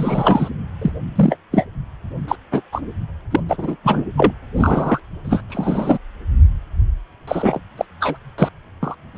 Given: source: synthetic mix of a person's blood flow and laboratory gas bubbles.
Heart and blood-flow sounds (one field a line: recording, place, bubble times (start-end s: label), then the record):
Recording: Doppler ultrasound of blood flow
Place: precordium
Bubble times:
0.00-0.49 s: bubbles
0.82-0.92 s: bubbles
1.15-1.39 s: bubbles
1.52-1.66 s: bubbles
2.27-2.35 s: bubbles
2.51-2.61 s: bubbles
2.72-2.81 s: bubbles
3.31-3.41 s: bubbles
3.49-3.76 s: bubbles
3.83-4.04 s: bubbles
4.17-4.32 s: bubbles
4.56-5.00 s: bubbles
5.24-5.42 s: bubbles
5.49-5.98 s: bubbles
7.28-7.60 s: bubbles
7.77-7.85 s: bubbles
8.00-8.18 s: bubbles
8.38-8.49 s: bubbles
8.82-8.95 s: bubbles
9.14-9.18 s: bubbles
From the record:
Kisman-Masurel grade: 243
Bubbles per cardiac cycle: several, 3 to 8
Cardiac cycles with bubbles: 100%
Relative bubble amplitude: loud (0.450 to 0.775)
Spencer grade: 3 (all of the cardiac periods contain showers or single bubble signals, but not dominating or overriding the cardiac motion signals)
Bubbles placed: anywhere in the cardiac cycle